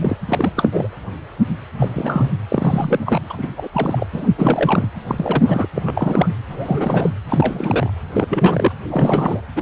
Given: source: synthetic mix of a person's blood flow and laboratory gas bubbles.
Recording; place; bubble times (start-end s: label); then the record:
Doppler ultrasound of blood flow; precordium
0.02-0.16 s: bubbles
0.28-0.52 s: bubbles
0.56-0.69 s: bubbles
0.72-0.88 s: bubbles
1.77-2.30 s: bubbles
2.48-3.19 s: bubbles
3.29-3.49 s: bubbles
3.57-3.69 s: bubbles
3.73-4.06 s: bubbles
4.12-4.27 s: bubbles
4.38-4.87 s: bubbles
5.07-5.68 s: bubbles
5.75-6.35 s: bubbles
6.50-7.10 s: bubbles
7.29-7.90 s: bubbles
8.12-8.72 s: bubbles
8.89-9.41 s: bubbles
9.56-9.61 s: bubbles
From the record:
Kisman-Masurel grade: 332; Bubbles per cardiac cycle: rolling drumbeat, 9 or more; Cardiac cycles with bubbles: 50 to 99%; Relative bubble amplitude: moderate (0.250 to 0.450); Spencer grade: 3 (all of the cardiac periods contain showers or single bubble signals, but not dominating or overriding the cardiac motion signals); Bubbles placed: anywhere in the cardiac cycle